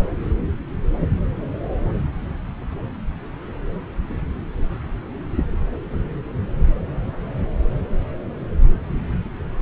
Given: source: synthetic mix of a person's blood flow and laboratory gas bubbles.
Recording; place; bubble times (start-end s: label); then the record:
Doppler ultrasound of blood flow; subclavian vein
no bubbles
From the record:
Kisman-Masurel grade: 000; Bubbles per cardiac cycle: 0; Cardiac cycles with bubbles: 0%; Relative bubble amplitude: no bubbles discernible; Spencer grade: 0 (complete lack of bubble signals)